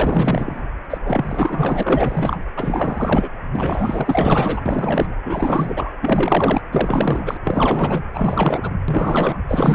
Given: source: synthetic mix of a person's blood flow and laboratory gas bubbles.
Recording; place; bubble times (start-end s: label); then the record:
Doppler ultrasound of blood flow; precordium
0.00-0.60 s: bubbles
0.90-0.98 s: bubbles
1.03-2.45 s: bubbles
2.56-3.29 s: bubbles
3.52-4.62 s: bubbles
4.65-5.15 s: bubbles
5.24-5.92 s: bubbles
6.00-6.61 s: bubbles
6.72-7.37 s: bubbles
7.44-8.03 s: bubbles
8.13-8.73 s: bubbles
8.88-9.38 s: bubbles
9.47-9.75 s: bubbles
From the record:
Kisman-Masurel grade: 444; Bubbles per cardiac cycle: continuous sound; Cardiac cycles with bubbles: 100%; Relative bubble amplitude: maximal (0.775 to 0.999); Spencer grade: 4 (maximum detectable bubble signal sounding continuously throughout systole and diastole of every cardiac period, and overriding the amplitude of the normal cardiac signals); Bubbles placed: anywhere in the cardiac cycle